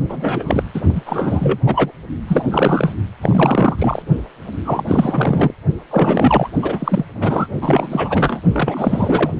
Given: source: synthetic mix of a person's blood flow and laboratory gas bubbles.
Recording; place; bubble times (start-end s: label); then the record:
Doppler ultrasound of blood flow; precordium
0.09-0.66 s: bubbles
0.74-0.81 s: bubbles
0.94-1.01 s: bubbles
1.06-1.58 s: bubbles
1.65-1.92 s: bubbles
2.27-2.96 s: bubbles
3.21-4.03 s: bubbles
4.65-5.54 s: bubbles
5.90-6.48 s: bubbles
6.62-7.04 s: bubbles
7.15-7.47 s: bubbles
7.61-8.41 s: bubbles
8.52-9.31 s: bubbles
From the record:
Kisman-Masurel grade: 343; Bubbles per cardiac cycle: rolling drumbeat, 9 or more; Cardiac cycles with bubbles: 100%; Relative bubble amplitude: loud (0.450 to 0.775); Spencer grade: 3 (all of the cardiac periods contain showers or single bubble signals, but not dominating or overriding the cardiac motion signals); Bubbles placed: only in the low amplitude regions of the cardiac cycle